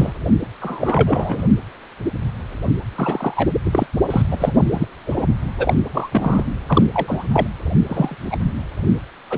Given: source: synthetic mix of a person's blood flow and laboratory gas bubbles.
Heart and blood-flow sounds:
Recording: Doppler ultrasound of blood flow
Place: precordium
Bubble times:
0.00-0.12 s: bubbles
0.60-1.45 s: bubbles
2.95-3.48 s: bubbles
3.65-3.87 s: bubbles
4.10-4.61 s: bubbles
4.71-4.86 s: bubbles
5.05-5.25 s: bubbles
5.58-5.74 s: bubbles
5.94-6.44 s: bubbles
6.68-6.83 s: bubbles
6.94-7.28 s: bubbles
7.33-7.47 s: bubbles
7.89-8.15 s: bubbles
8.30-8.37 s: bubbles
9.30-9.38 s: bubbles
From the record:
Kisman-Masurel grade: 233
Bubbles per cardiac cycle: several, 3 to 8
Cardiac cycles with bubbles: 50 to 99%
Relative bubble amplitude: loud (0.450 to 0.775)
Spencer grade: 3 (all of the cardiac periods contain showers or single bubble signals, but not dominating or overriding the cardiac motion signals)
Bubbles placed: only in the low amplitude regions of the cardiac cycle

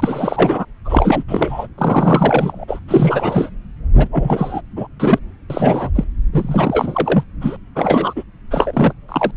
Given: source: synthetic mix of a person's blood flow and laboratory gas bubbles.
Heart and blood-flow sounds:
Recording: Doppler ultrasound of blood flow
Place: subclavian vein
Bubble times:
0.00-0.65 s: bubbles
0.84-1.23 s: bubbles
1.27-1.67 s: bubbles
1.77-2.65 s: bubbles
2.67-2.79 s: bubbles
2.88-3.50 s: bubbles
3.97-4.08 s: bubbles
4.12-4.61 s: bubbles
4.76-4.87 s: bubbles
5.00-5.19 s: bubbles
5.50-5.90 s: bubbles
5.95-6.04 s: bubbles
6.32-7.24 s: bubbles
7.41-7.57 s: bubbles
7.75-8.23 s: bubbles
8.50-8.92 s: bubbles
9.08-9.31 s: bubbles
From the record:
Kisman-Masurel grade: 343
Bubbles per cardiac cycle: rolling drumbeat, 9 or more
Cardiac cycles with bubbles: 100%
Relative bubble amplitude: loud (0.450 to 0.775)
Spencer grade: 3 (all of the cardiac periods contain showers or single bubble signals, but not dominating or overriding the cardiac motion signals)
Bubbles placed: anywhere in the cardiac cycle

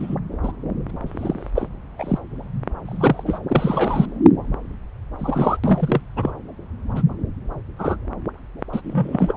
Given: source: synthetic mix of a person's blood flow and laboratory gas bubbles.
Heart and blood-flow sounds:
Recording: Doppler ultrasound of blood flow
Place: subclavian vein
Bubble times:
0.00-0.15 s: bubbles
0.42-0.52 s: bubbles
0.89-0.91 s: bubbles
1.06-1.50 s: bubbles
1.55-1.67 s: bubbles
1.98-2.19 s: bubbles
2.85-3.38 s: bubbles
3.48-4.05 s: bubbles
5.19-5.56 s: bubbles
5.63-6.01 s: bubbles
6.16-6.31 s: bubbles
6.96-7.02 s: bubbles
7.79-7.96 s: bubbles
8.73-9.33 s: bubbles
From the record:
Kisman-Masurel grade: 242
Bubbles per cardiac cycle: several, 3 to 8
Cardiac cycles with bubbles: 100%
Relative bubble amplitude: moderate (0.250 to 0.450)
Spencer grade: 3 (all of the cardiac periods contain showers or single bubble signals, but not dominating or overriding the cardiac motion signals)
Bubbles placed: anywhere in the cardiac cycle

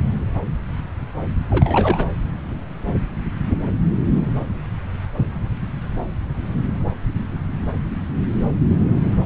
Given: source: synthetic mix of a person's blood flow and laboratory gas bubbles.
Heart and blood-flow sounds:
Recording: Doppler ultrasound of blood flow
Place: subclavian vein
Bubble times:
1.50-2.05 s: bubbles
From the record:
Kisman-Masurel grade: 212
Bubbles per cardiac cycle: several, 3 to 8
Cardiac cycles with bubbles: 1 to 10%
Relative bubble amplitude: moderate (0.250 to 0.450)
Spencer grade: 1 (occasional bubble signal discernible with the cardiac motion signal, with majority of cardiac periods free of bubbles)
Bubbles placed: anywhere in the cardiac cycle

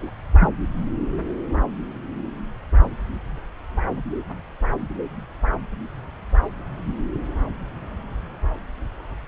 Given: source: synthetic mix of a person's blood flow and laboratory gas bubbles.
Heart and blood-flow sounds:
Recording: Doppler ultrasound of blood flow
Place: subclavian vein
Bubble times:
0.00-0.12 s: bubbles
0.40-0.49 s: bubbles
From the record:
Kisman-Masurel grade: 112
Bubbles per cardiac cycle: 1 to 2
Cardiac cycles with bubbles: 1 to 10%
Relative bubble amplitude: moderate (0.250 to 0.450)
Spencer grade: 1 (occasional bubble signal discernible with the cardiac motion signal, with majority of cardiac periods free of bubbles)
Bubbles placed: anywhere in the cardiac cycle

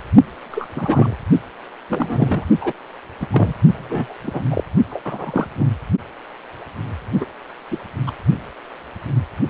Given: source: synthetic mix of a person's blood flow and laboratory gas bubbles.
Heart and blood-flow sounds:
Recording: Doppler ultrasound of blood flow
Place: precordium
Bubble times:
0.51-0.66 s: bubbles
0.76-1.15 s: bubbles
1.90-2.45 s: bubbles
2.60-2.73 s: bubbles
3.21-3.27 s: bubbles
3.32-3.53 s: bubbles
3.73-4.14 s: bubbles
4.24-4.43 s: bubbles
4.51-4.64 s: bubbles
4.90-5.48 s: bubbles
5.56-5.67 s: bubbles
7.20-7.25 s: bubbles
7.71-7.77 s: bubbles
8.06-8.12 s: bubbles
From the record:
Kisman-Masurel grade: 232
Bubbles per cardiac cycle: several, 3 to 8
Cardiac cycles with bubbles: 50 to 99%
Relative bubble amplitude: moderate (0.250 to 0.450)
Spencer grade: 3 (all of the cardiac periods contain showers or single bubble signals, but not dominating or overriding the cardiac motion signals)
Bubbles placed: only in the low amplitude regions of the cardiac cycle

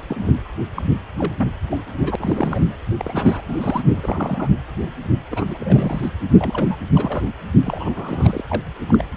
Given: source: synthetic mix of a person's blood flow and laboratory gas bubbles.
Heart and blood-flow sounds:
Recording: Doppler ultrasound of blood flow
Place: precordium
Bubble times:
0.08-0.39 s: bubbles
0.76-0.82 s: bubbles
1.19-1.33 s: bubbles
1.38-1.47 s: bubbles
1.70-1.79 s: bubbles
2.00-2.15 s: bubbles
2.18-2.64 s: bubbles
2.98-3.41 s: bubbles
3.48-4.48 s: bubbles
4.81-4.92 s: bubbles
5.30-5.57 s: bubbles
5.59-6.10 s: bubbles
6.38-6.76 s: bubbles
6.94-7.30 s: bubbles
7.63-8.41 s: bubbles
8.48-8.61 s: bubbles
8.88-9.05 s: bubbles
From the record:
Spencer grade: 3 (all of the cardiac periods contain showers or single bubble signals, but not dominating or overriding the cardiac motion signals)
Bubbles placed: anywhere in the cardiac cycle

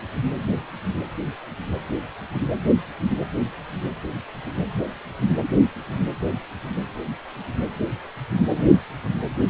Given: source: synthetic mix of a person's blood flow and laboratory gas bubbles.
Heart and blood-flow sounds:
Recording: Doppler ultrasound of blood flow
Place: precordium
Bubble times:
8.55-8.63 s: bubbles
From the record:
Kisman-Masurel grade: 111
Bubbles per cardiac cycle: 1 to 2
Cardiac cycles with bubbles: 1 to 10%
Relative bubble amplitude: barely perceptible (0.100 to 0.250)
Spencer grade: 1 (occasional bubble signal discernible with the cardiac motion signal, with majority of cardiac periods free of bubbles)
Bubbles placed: anywhere in the cardiac cycle

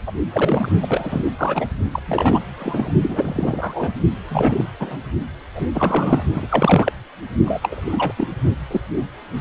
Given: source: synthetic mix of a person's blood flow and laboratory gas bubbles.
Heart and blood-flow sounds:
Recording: Doppler ultrasound of blood flow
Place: precordium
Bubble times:
0.07-0.12 s: bubbles
0.33-0.69 s: bubbles
0.81-1.27 s: bubbles
1.38-1.74 s: bubbles
1.92-1.99 s: bubbles
2.05-2.40 s: bubbles
2.59-2.92 s: bubbles
3.02-3.92 s: bubbles
4.29-4.65 s: bubbles
4.79-4.97 s: bubbles
5.54-5.67 s: bubbles
5.74-6.23 s: bubbles
6.34-6.47 s: bubbles
6.50-6.92 s: bubbles
7.45-8.12 s: bubbles
8.17-8.28 s: bubbles
8.71-8.80 s: bubbles
8.90-9.06 s: bubbles
9.34-9.41 s: bubbles
From the record:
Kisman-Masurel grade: 343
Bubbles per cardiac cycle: rolling drumbeat, 9 or more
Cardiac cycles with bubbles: 100%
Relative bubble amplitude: loud (0.450 to 0.775)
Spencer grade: 3 (all of the cardiac periods contain showers or single bubble signals, but not dominating or overriding the cardiac motion signals)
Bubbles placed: only in the low amplitude regions of the cardiac cycle

